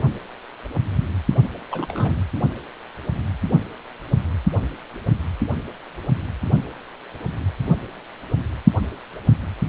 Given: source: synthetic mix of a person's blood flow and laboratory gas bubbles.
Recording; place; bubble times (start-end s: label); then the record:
Doppler ultrasound of blood flow; precordium
1.71-2.23 s: bubbles
From the record:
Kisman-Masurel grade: 211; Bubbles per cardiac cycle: several, 3 to 8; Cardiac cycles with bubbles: 1 to 10%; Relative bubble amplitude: barely perceptible (0.100 to 0.250); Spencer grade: 1 (occasional bubble signal discernible with the cardiac motion signal, with majority of cardiac periods free of bubbles); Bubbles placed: only in the low amplitude regions of the cardiac cycle